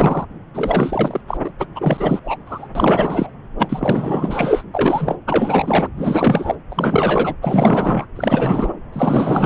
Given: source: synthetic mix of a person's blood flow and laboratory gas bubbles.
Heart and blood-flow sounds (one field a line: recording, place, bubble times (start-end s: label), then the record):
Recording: Doppler ultrasound of blood flow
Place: subclavian vein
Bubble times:
0.00-0.26 s: bubbles
0.53-1.21 s: bubbles
1.28-1.38 s: bubbles
1.44-1.51 s: bubbles
1.58-1.66 s: bubbles
1.75-2.19 s: bubbles
2.24-2.37 s: bubbles
2.46-2.67 s: bubbles
2.75-3.29 s: bubbles
3.59-4.63 s: bubbles
4.74-5.16 s: bubbles
5.27-5.88 s: bubbles
5.96-6.55 s: bubbles
6.70-7.35 s: bubbles
7.42-8.06 s: bubbles
8.16-8.73 s: bubbles
8.93-9.46 s: bubbles
From the record:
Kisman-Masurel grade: 444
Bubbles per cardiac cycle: continuous sound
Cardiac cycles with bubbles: 100%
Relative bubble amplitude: maximal (0.775 to 0.999)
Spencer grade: 4 (maximum detectable bubble signal sounding continuously throughout systole and diastole of every cardiac period, and overriding the amplitude of the normal cardiac signals)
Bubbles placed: anywhere in the cardiac cycle